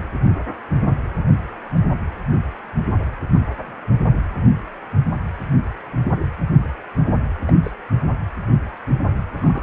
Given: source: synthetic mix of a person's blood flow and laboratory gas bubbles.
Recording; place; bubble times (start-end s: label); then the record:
Doppler ultrasound of blood flow; precordium
3.33-3.39 s: bubbles
7.46-7.52 s: bubbles
7.62-7.71 s: bubbles
9.40-9.63 s: bubbles
From the record:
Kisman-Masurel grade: 121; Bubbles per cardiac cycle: 1 to 2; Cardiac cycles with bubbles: 10 to 50%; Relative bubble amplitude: barely perceptible (0.100 to 0.250); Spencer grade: 2 (many but less than half of the cardiac periods contain bubble signals, singularly or in groups); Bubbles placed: anywhere in the cardiac cycle